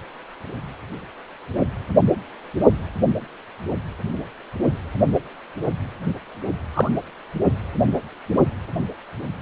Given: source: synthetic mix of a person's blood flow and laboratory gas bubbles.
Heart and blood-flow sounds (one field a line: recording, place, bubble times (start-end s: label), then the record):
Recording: Doppler ultrasound of blood flow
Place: precordium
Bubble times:
6.74-6.91 s: bubbles
From the record:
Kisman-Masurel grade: 113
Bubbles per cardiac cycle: 1 to 2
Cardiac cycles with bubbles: 1 to 10%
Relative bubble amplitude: loud (0.450 to 0.775)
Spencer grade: 1 (occasional bubble signal discernible with the cardiac motion signal, with majority of cardiac periods free of bubbles)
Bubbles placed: only in the low amplitude regions of the cardiac cycle